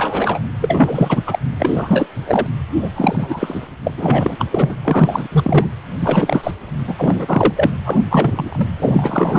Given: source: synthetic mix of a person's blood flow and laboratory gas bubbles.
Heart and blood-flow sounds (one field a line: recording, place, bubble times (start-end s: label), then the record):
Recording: Doppler ultrasound of blood flow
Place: precordium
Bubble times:
0.00-0.40 s: bubbles
0.61-1.39 s: bubbles
1.59-2.07 s: bubbles
2.26-2.47 s: bubbles
2.79-2.89 s: bubbles
2.95-3.68 s: bubbles
3.83-3.94 s: bubbles
3.98-4.45 s: bubbles
4.52-4.76 s: bubbles
4.84-5.28 s: bubbles
5.32-5.67 s: bubbles
6.00-6.51 s: bubbles
6.87-7.54 s: bubbles
7.56-7.72 s: bubbles
7.85-7.98 s: bubbles
8.10-8.68 s: bubbles
8.79-9.39 s: bubbles
From the record:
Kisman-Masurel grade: 343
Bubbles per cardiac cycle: rolling drumbeat, 9 or more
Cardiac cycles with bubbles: 100%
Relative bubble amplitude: loud (0.450 to 0.775)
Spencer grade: 3 (all of the cardiac periods contain showers or single bubble signals, but not dominating or overriding the cardiac motion signals)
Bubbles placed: anywhere in the cardiac cycle